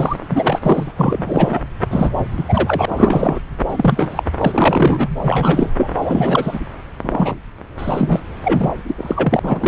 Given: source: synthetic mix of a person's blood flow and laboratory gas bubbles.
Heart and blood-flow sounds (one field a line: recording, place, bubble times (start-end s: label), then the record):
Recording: Doppler ultrasound of blood flow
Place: subclavian vein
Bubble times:
0.00-0.17 s: bubbles
0.20-0.91 s: bubbles
0.97-1.61 s: bubbles
1.91-2.10 s: bubbles
2.38-2.44 s: bubbles
2.48-2.85 s: bubbles
2.88-3.40 s: bubbles
3.70-4.24 s: bubbles
4.37-5.08 s: bubbles
5.24-5.72 s: bubbles
5.77-5.91 s: bubbles
5.95-6.59 s: bubbles
7.04-7.35 s: bubbles
7.78-8.21 s: bubbles
8.44-8.72 s: bubbles
8.88-8.95 s: bubbles
8.97-9.39 s: bubbles
9.43-9.68 s: bubbles
From the record:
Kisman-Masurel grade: 343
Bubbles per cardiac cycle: rolling drumbeat, 9 or more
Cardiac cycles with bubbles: 100%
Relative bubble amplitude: loud (0.450 to 0.775)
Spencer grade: 3 (all of the cardiac periods contain showers or single bubble signals, but not dominating or overriding the cardiac motion signals)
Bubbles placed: anywhere in the cardiac cycle